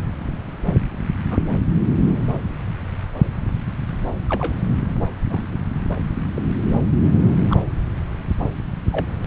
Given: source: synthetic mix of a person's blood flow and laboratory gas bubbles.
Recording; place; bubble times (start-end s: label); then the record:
Doppler ultrasound of blood flow; subclavian vein
1.29-1.38 s: bubbles
4.29-4.56 s: bubbles
5.29-5.42 s: bubbles
6.35-6.42 s: bubbles
7.50-7.60 s: bubbles
8.92-9.05 s: bubbles
From the record:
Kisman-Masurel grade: 121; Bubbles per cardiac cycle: 1 to 2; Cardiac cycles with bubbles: 10 to 50%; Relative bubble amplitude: barely perceptible (0.100 to 0.250); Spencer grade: 2 (many but less than half of the cardiac periods contain bubble signals, singularly or in groups); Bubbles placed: anywhere in the cardiac cycle